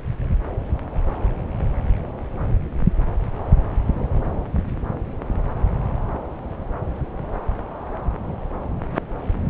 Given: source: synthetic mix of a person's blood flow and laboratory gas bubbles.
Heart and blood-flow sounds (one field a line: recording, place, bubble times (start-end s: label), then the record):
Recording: Doppler ultrasound of blood flow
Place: subclavian vein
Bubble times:
no bubbles
From the record:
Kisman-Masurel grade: 000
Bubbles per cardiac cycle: 0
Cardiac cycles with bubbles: 0%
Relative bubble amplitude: no bubbles discernible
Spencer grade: 0 (complete lack of bubble signals)